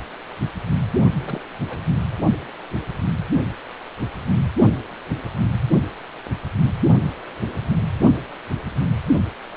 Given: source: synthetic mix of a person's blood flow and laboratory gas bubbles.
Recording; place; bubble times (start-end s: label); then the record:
Doppler ultrasound of blood flow; precordium
1.17-1.41 s: bubbles
1.69-1.78 s: bubbles
From the record:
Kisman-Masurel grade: 211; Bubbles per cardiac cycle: several, 3 to 8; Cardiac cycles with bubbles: 1 to 10%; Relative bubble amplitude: barely perceptible (0.100 to 0.250); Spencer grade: 1 (occasional bubble signal discernible with the cardiac motion signal, with majority of cardiac periods free of bubbles); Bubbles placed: only in the low amplitude regions of the cardiac cycle